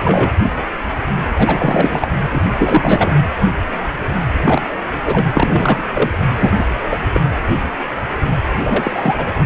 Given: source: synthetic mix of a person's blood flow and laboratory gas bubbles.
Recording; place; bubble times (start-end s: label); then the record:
Doppler ultrasound of blood flow; precordium
0.00-0.30 s: bubbles
1.35-2.07 s: bubbles
2.31-2.42 s: bubbles
2.59-3.15 s: bubbles
4.44-4.62 s: bubbles
5.05-5.26 s: bubbles
5.33-6.19 s: bubbles
6.38-6.51 s: bubbles
6.55-6.64 s: bubbles
6.90-7.00 s: bubbles
7.12-7.21 s: bubbles
8.63-9.14 s: bubbles
9.17-9.32 s: bubbles
From the record:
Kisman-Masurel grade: 233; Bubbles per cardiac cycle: several, 3 to 8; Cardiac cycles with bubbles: 50 to 99%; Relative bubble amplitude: loud (0.450 to 0.775); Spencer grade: 3 (all of the cardiac periods contain showers or single bubble signals, but not dominating or overriding the cardiac motion signals); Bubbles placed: anywhere in the cardiac cycle